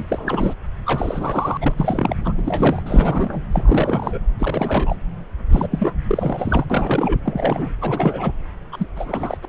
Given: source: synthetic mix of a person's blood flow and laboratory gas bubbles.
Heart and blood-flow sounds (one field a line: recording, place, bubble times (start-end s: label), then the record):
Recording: Doppler ultrasound of blood flow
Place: subclavian vein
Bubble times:
0.00-0.06 s: bubbles
0.08-0.53 s: bubbles
0.85-1.58 s: bubbles
1.61-1.74 s: bubbles
1.77-2.16 s: bubbles
2.24-2.33 s: bubbles
2.38-3.42 s: bubbles
3.52-4.18 s: bubbles
4.39-4.96 s: bubbles
5.50-5.68 s: bubbles
5.71-5.98 s: bubbles
6.04-6.65 s: bubbles
6.70-7.20 s: bubbles
7.25-7.73 s: bubbles
7.81-8.33 s: bubbles
8.72-8.87 s: bubbles
8.96-9.38 s: bubbles
9.42-9.46 s: bubbles
From the record:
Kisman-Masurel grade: 342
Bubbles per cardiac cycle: rolling drumbeat, 9 or more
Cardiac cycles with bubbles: 100%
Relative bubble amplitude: moderate (0.250 to 0.450)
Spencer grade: 3 (all of the cardiac periods contain showers or single bubble signals, but not dominating or overriding the cardiac motion signals)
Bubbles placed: anywhere in the cardiac cycle